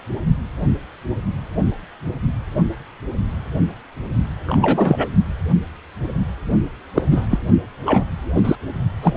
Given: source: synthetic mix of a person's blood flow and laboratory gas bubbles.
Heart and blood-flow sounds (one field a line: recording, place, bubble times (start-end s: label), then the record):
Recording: Doppler ultrasound of blood flow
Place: precordium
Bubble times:
4.47-5.09 s: bubbles
6.95-7.04 s: bubbles
7.10-7.27 s: bubbles
7.30-7.38 s: bubbles
7.85-8.04 s: bubbles
8.35-8.55 s: bubbles
9.02-9.16 s: bubbles
From the record:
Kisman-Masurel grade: 233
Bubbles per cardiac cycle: several, 3 to 8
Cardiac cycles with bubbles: 50 to 99%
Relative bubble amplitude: loud (0.450 to 0.775)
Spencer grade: 3 (all of the cardiac periods contain showers or single bubble signals, but not dominating or overriding the cardiac motion signals)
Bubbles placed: only in the low amplitude regions of the cardiac cycle